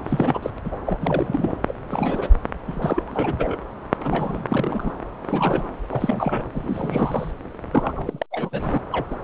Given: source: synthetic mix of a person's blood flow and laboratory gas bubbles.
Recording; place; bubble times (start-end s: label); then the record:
Doppler ultrasound of blood flow; subclavian vein
0.05-0.39 s: bubbles
0.42-0.51 s: bubbles
0.65-0.76 s: bubbles
0.86-1.52 s: bubbles
1.67-1.74 s: bubbles
1.85-2.28 s: bubbles
2.67-3.56 s: bubbles
3.97-4.93 s: bubbles
5.22-5.69 s: bubbles
5.89-6.43 s: bubbles
6.53-7.31 s: bubbles
7.71-8.26 s: bubbles
8.31-8.81 s: bubbles
8.91-9.06 s: bubbles
9.11-9.14 s: bubbles
From the record:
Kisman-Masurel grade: 342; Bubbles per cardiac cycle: rolling drumbeat, 9 or more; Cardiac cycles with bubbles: 100%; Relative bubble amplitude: moderate (0.250 to 0.450); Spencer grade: 3 (all of the cardiac periods contain showers or single bubble signals, but not dominating or overriding the cardiac motion signals); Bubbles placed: anywhere in the cardiac cycle